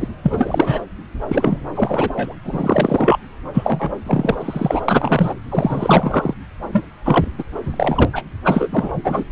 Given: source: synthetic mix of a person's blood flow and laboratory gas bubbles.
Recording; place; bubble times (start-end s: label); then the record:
Doppler ultrasound of blood flow; subclavian vein
0.00-0.08 s: bubbles
0.23-0.79 s: bubbles
1.29-1.58 s: bubbles
1.75-2.35 s: bubbles
2.44-3.19 s: bubbles
3.54-3.90 s: bubbles
4.06-4.35 s: bubbles
4.40-4.81 s: bubbles
4.88-5.34 s: bubbles
5.49-6.34 s: bubbles
6.72-6.85 s: bubbles
7.04-7.24 s: bubbles
7.38-7.43 s: bubbles
7.66-8.05 s: bubbles
8.12-8.23 s: bubbles
8.44-8.94 s: bubbles
9.04-9.24 s: bubbles
From the record:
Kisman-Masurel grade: 343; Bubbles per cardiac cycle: rolling drumbeat, 9 or more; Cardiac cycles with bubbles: 100%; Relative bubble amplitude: loud (0.450 to 0.775); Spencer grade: 3 (all of the cardiac periods contain showers or single bubble signals, but not dominating or overriding the cardiac motion signals); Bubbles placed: anywhere in the cardiac cycle